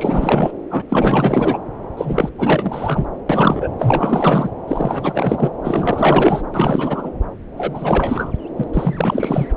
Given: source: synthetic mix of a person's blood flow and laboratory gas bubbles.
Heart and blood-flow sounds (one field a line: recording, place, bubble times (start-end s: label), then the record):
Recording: Doppler ultrasound of blood flow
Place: subclavian vein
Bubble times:
0.00-0.52 s: bubbles
0.70-0.82 s: bubbles
0.89-1.59 s: bubbles
1.97-2.29 s: bubbles
2.38-3.06 s: bubbles
3.29-3.69 s: bubbles
3.79-4.51 s: bubbles
4.67-5.50 s: bubbles
5.63-6.42 s: bubbles
6.54-7.10 s: bubbles
7.56-8.32 s: bubbles
8.57-8.63 s: bubbles
8.73-9.47 s: bubbles
From the record:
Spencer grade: 4 (maximum detectable bubble signal sounding continuously throughout systole and diastole of every cardiac period, and overriding the amplitude of the normal cardiac signals)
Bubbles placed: anywhere in the cardiac cycle